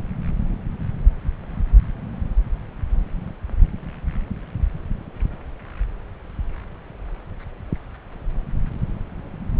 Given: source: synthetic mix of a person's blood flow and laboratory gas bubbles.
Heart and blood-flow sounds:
Doppler ultrasound of blood flow; subclavian vein
no bubbles
From the record:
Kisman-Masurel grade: 000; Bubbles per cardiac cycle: 0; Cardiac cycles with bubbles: 0%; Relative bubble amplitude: no bubbles discernible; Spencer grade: 0 (complete lack of bubble signals)

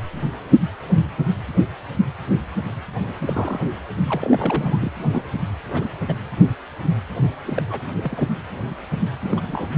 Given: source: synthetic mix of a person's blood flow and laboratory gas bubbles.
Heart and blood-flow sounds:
Doppler ultrasound of blood flow; precordium
3.25-3.71 s: bubbles
4.08-4.92 s: bubbles
5.12-5.22 s: bubbles
5.72-5.88 s: bubbles
6.08-6.14 s: bubbles
7.46-7.63 s: bubbles
7.68-7.83 s: bubbles
7.97-8.28 s: bubbles
9.22-9.68 s: bubbles
From the record:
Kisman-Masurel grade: 221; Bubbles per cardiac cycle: several, 3 to 8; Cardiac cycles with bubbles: 10 to 50%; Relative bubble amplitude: barely perceptible (0.100 to 0.250); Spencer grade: 2 (many but less than half of the cardiac periods contain bubble signals, singularly or in groups); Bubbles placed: anywhere in the cardiac cycle

